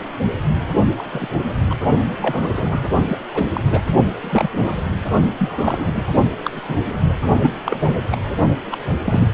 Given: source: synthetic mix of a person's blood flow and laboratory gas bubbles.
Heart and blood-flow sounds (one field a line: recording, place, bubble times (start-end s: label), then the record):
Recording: Doppler ultrasound of blood flow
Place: precordium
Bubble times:
0.97-1.27 s: bubbles
1.70-1.74 s: bubbles
2.21-2.89 s: bubbles
3.05-3.18 s: bubbles
3.33-3.46 s: bubbles
3.50-3.62 s: bubbles
3.71-3.83 s: bubbles
4.22-4.50 s: bubbles
4.53-4.73 s: bubbles
5.38-5.92 s: bubbles
5.94-6.06 s: bubbles
6.44-6.50 s: bubbles
6.56-6.78 s: bubbles
7.08-7.16 s: bubbles
7.42-7.49 s: bubbles
7.65-8.02 s: bubbles
8.12-8.21 s: bubbles
8.71-8.77 s: bubbles
9.05-9.28 s: bubbles
From the record:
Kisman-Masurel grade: 242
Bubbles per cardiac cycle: several, 3 to 8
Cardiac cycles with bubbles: 100%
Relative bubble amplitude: moderate (0.250 to 0.450)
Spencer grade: 3 (all of the cardiac periods contain showers or single bubble signals, but not dominating or overriding the cardiac motion signals)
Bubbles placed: only in the low amplitude regions of the cardiac cycle